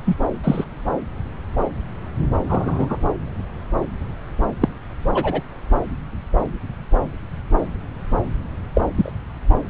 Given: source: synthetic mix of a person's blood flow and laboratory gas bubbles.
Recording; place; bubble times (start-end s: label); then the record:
Doppler ultrasound of blood flow; subclavian vein
0.05-0.17 s: bubbles
0.44-0.65 s: bubbles
2.48-2.96 s: bubbles
4.60-4.69 s: bubbles
5.14-5.42 s: bubbles
8.74-8.81 s: bubbles
8.95-9.12 s: bubbles
From the record:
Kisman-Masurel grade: 123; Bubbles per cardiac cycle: 1 to 2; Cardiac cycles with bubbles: 10 to 50%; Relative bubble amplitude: loud (0.450 to 0.775); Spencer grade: 2 (many but less than half of the cardiac periods contain bubble signals, singularly or in groups); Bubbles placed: anywhere in the cardiac cycle